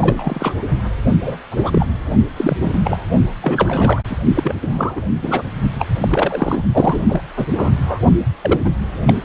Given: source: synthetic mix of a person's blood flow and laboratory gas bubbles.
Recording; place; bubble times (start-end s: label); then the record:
Doppler ultrasound of blood flow; precordium
0.00-0.52 s: bubbles
1.24-1.38 s: bubbles
1.51-1.86 s: bubbles
2.36-2.57 s: bubbles
2.61-2.80 s: bubbles
2.84-3.09 s: bubbles
3.42-4.01 s: bubbles
4.09-4.16 s: bubbles
4.34-4.55 s: bubbles
4.62-5.01 s: bubbles
5.21-5.42 s: bubbles
5.79-5.86 s: bubbles
6.00-6.64 s: bubbles
6.72-7.01 s: bubbles
7.08-7.21 s: bubbles
7.37-7.46 s: bubbles
7.56-8.01 s: bubbles
8.42-8.61 s: bubbles
8.65-8.72 s: bubbles
9.07-9.14 s: bubbles
From the record:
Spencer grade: 3 (all of the cardiac periods contain showers or single bubble signals, but not dominating or overriding the cardiac motion signals); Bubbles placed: only in the low amplitude regions of the cardiac cycle